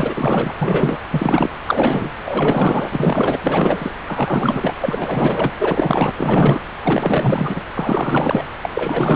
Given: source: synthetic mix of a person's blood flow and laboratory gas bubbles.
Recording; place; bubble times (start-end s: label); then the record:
Doppler ultrasound of blood flow; subclavian vein
0.00-0.15 s: bubbles
0.17-0.54 s: bubbles
0.59-0.96 s: bubbles
1.11-1.50 s: bubbles
1.65-2.12 s: bubbles
2.26-3.39 s: bubbles
3.42-3.92 s: bubbles
4.07-4.75 s: bubbles
4.80-5.52 s: bubbles
5.59-6.11 s: bubbles
6.17-6.60 s: bubbles
6.83-7.63 s: bubbles
7.73-8.47 s: bubbles
8.62-8.70 s: bubbles
8.74-9.16 s: bubbles
From the record:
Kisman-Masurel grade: 444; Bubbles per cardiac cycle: continuous sound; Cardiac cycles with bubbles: 100%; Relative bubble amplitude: maximal (0.775 to 0.999); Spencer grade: 4 (maximum detectable bubble signal sounding continuously throughout systole and diastole of every cardiac period, and overriding the amplitude of the normal cardiac signals); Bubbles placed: anywhere in the cardiac cycle